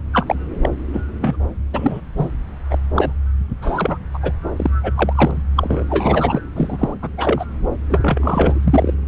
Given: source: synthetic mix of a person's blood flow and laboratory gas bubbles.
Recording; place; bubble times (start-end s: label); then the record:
Doppler ultrasound of blood flow; subclavian vein
0.12-0.35 s: bubbles
0.62-0.69 s: bubbles
0.92-1.01 s: bubbles
1.21-1.37 s: bubbles
1.73-2.01 s: bubbles
2.17-2.31 s: bubbles
2.70-2.78 s: bubbles
2.96-3.13 s: bubbles
3.61-3.98 s: bubbles
4.14-4.19 s: bubbles
4.23-4.32 s: bubbles
4.57-4.70 s: bubbles
4.83-4.93 s: bubbles
4.96-5.43 s: bubbles
5.56-5.84 s: bubbles
5.90-6.40 s: bubbles
6.55-6.95 s: bubbles
7.02-7.10 s: bubbles
7.18-7.46 s: bubbles
7.89-8.95 s: bubbles
From the record:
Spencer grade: 3 (all of the cardiac periods contain showers or single bubble signals, but not dominating or overriding the cardiac motion signals); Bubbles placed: anywhere in the cardiac cycle